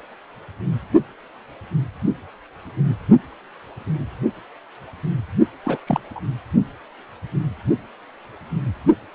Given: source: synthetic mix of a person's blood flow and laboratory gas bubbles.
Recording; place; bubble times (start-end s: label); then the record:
Doppler ultrasound of blood flow; precordium
5.63-5.78 s: bubbles
5.87-6.00 s: bubbles
6.15-6.21 s: bubbles
From the record:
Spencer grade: 1 (occasional bubble signal discernible with the cardiac motion signal, with majority of cardiac periods free of bubbles); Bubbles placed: only in the low amplitude regions of the cardiac cycle